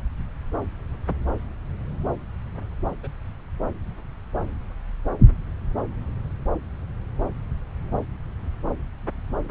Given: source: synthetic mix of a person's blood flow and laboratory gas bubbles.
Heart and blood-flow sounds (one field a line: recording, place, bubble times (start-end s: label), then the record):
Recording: Doppler ultrasound of blood flow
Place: subclavian vein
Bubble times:
3.03-3.08 s: bubbles
From the record:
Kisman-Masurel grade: 111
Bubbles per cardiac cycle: 1 to 2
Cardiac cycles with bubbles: 1 to 10%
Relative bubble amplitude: barely perceptible (0.100 to 0.250)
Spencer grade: 1 (occasional bubble signal discernible with the cardiac motion signal, with majority of cardiac periods free of bubbles)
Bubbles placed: anywhere in the cardiac cycle